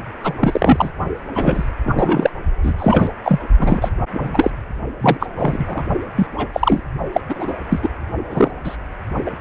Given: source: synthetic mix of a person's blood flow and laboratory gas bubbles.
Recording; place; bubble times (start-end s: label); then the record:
Doppler ultrasound of blood flow; precordium
0.23-0.34 s: bubbles
0.39-0.91 s: bubbles
1.34-1.67 s: bubbles
1.83-2.31 s: bubbles
2.62-2.74 s: bubbles
2.79-3.08 s: bubbles
3.23-3.39 s: bubbles
3.58-3.89 s: bubbles
4.11-4.50 s: bubbles
5.00-5.27 s: bubbles
5.36-5.85 s: bubbles
6.15-6.27 s: bubbles
6.38-6.47 s: bubbles
6.53-6.80 s: bubbles
7.12-7.21 s: bubbles
7.29-7.55 s: bubbles
7.70-7.88 s: bubbles
8.30-8.51 s: bubbles
8.64-8.77 s: bubbles
9.25-9.31 s: bubbles
From the record:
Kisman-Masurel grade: 243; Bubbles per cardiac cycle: several, 3 to 8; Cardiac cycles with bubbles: 100%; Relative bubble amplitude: loud (0.450 to 0.775); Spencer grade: 3 (all of the cardiac periods contain showers or single bubble signals, but not dominating or overriding the cardiac motion signals); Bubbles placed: only in the low amplitude regions of the cardiac cycle